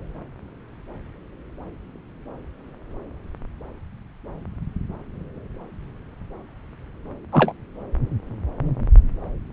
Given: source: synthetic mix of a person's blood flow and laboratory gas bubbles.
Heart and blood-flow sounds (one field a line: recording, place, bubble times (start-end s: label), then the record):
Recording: Doppler ultrasound of blood flow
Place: subclavian vein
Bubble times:
7.33-7.53 s: bubbles
From the record:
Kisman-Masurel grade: 113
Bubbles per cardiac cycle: 1 to 2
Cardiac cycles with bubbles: 1 to 10%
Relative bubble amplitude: loud (0.450 to 0.775)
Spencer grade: 1 (occasional bubble signal discernible with the cardiac motion signal, with majority of cardiac periods free of bubbles)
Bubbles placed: anywhere in the cardiac cycle